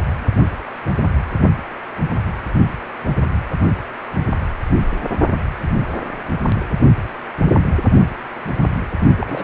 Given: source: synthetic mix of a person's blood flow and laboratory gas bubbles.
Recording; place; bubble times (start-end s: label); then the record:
Doppler ultrasound of blood flow; precordium
9.17-9.44 s: bubbles
From the record:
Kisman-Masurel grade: 211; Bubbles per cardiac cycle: several, 3 to 8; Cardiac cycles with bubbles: 1 to 10%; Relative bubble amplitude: barely perceptible (0.100 to 0.250); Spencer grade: 1 (occasional bubble signal discernible with the cardiac motion signal, with majority of cardiac periods free of bubbles); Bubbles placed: only in the low amplitude regions of the cardiac cycle